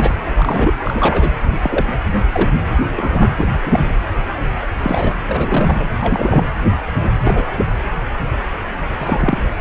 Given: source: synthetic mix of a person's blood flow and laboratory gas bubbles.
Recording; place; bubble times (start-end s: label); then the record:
Doppler ultrasound of blood flow; precordium
0.00-0.24 s: bubbles
0.35-0.74 s: bubbles
0.83-1.29 s: bubbles
1.61-1.86 s: bubbles
2.32-2.54 s: bubbles
2.96-3.30 s: bubbles
3.37-3.50 s: bubbles
3.62-3.96 s: bubbles
4.77-5.13 s: bubbles
5.28-5.84 s: bubbles
6.00-6.46 s: bubbles
7.23-7.46 s: bubbles
7.56-7.65 s: bubbles
8.98-9.42 s: bubbles
From the record:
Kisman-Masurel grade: 233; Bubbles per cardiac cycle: several, 3 to 8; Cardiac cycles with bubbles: 50 to 99%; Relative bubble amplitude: loud (0.450 to 0.775); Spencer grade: 3 (all of the cardiac periods contain showers or single bubble signals, but not dominating or overriding the cardiac motion signals); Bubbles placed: anywhere in the cardiac cycle